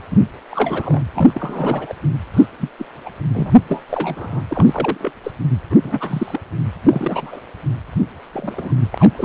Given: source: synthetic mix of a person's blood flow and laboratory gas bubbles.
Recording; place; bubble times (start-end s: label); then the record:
Doppler ultrasound of blood flow; precordium
0.10-0.17 s: bubbles
0.51-1.01 s: bubbles
1.15-1.94 s: bubbles
2.33-2.46 s: bubbles
2.59-2.69 s: bubbles
2.78-2.86 s: bubbles
3.06-3.09 s: bubbles
3.33-3.59 s: bubbles
3.68-3.84 s: bubbles
3.89-4.41 s: bubbles
4.48-5.12 s: bubbles
5.24-5.32 s: bubbles
5.70-5.76 s: bubbles
5.83-6.40 s: bubbles
6.82-7.41 s: bubbles
8.33-8.72 s: bubbles
8.90-9.25 s: bubbles
From the record:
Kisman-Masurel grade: 242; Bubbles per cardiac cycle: several, 3 to 8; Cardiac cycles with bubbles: 100%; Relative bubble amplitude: moderate (0.250 to 0.450); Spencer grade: 3 (all of the cardiac periods contain showers or single bubble signals, but not dominating or overriding the cardiac motion signals); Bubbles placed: anywhere in the cardiac cycle